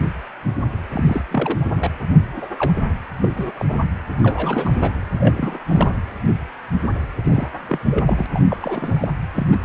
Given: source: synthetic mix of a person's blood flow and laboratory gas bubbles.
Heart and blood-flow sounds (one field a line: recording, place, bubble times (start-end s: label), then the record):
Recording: Doppler ultrasound of blood flow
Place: precordium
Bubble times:
0.92-1.22 s: bubbles
1.30-1.91 s: bubbles
2.29-2.47 s: bubbles
2.58-2.73 s: bubbles
3.21-3.29 s: bubbles
3.36-3.51 s: bubbles
3.59-3.65 s: bubbles
3.67-3.79 s: bubbles
4.21-5.00 s: bubbles
5.20-5.59 s: bubbles
5.69-5.99 s: bubbles
7.24-7.47 s: bubbles
7.68-7.79 s: bubbles
7.90-8.26 s: bubbles
8.31-8.43 s: bubbles
8.49-9.12 s: bubbles
9.36-9.47 s: bubbles
9.52-9.56 s: bubbles
From the record:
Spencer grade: 3 (all of the cardiac periods contain showers or single bubble signals, but not dominating or overriding the cardiac motion signals)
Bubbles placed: anywhere in the cardiac cycle